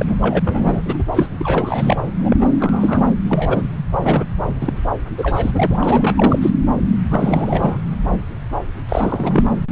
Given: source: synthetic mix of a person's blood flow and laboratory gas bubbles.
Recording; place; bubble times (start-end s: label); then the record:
Doppler ultrasound of blood flow; subclavian vein
0.00-0.15 s: bubbles
0.21-0.39 s: bubbles
0.44-0.82 s: bubbles
0.85-1.04 s: bubbles
1.13-1.28 s: bubbles
1.39-2.02 s: bubbles
2.21-2.36 s: bubbles
2.40-2.46 s: bubbles
2.60-3.06 s: bubbles
3.27-3.69 s: bubbles
4.02-4.24 s: bubbles
4.61-4.79 s: bubbles
5.18-5.51 s: bubbles
5.54-5.79 s: bubbles
5.82-6.51 s: bubbles
7.10-7.80 s: bubbles
8.88-9.44 s: bubbles
From the record:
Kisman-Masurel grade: 332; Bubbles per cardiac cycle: rolling drumbeat, 9 or more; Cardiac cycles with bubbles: 50 to 99%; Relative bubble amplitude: moderate (0.250 to 0.450); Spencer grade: 3 (all of the cardiac periods contain showers or single bubble signals, but not dominating or overriding the cardiac motion signals); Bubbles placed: anywhere in the cardiac cycle